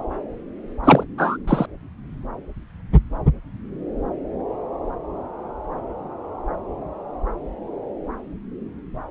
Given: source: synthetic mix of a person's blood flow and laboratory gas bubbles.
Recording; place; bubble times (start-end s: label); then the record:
Doppler ultrasound of blood flow; subclavian vein
0.84-1.04 s: bubbles
1.18-1.37 s: bubbles
1.48-1.66 s: bubbles
From the record:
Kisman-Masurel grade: 223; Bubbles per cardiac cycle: several, 3 to 8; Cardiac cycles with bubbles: 10 to 50%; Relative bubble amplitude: loud (0.450 to 0.775); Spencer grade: 2 (many but less than half of the cardiac periods contain bubble signals, singularly or in groups); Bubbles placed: anywhere in the cardiac cycle